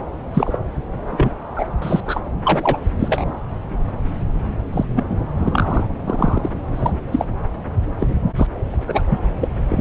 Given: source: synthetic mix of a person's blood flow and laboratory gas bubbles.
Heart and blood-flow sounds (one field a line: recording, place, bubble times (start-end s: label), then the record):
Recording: Doppler ultrasound of blood flow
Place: subclavian vein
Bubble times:
0.34-0.58 s: bubbles
1.12-1.30 s: bubbles
1.55-1.66 s: bubbles
1.81-2.01 s: bubbles
2.06-2.20 s: bubbles
2.45-2.77 s: bubbles
2.99-3.25 s: bubbles
4.72-4.85 s: bubbles
4.96-5.03 s: bubbles
5.09-5.16 s: bubbles
5.40-5.86 s: bubbles
6.04-6.51 s: bubbles
6.75-6.92 s: bubbles
7.12-7.26 s: bubbles
8.00-8.08 s: bubbles
8.36-8.47 s: bubbles
8.71-9.20 s: bubbles
9.41-9.49 s: bubbles
9.68-9.81 s: bubbles
From the record:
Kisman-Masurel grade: 243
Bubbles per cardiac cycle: several, 3 to 8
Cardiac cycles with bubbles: 100%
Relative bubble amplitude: loud (0.450 to 0.775)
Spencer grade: 3 (all of the cardiac periods contain showers or single bubble signals, but not dominating or overriding the cardiac motion signals)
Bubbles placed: anywhere in the cardiac cycle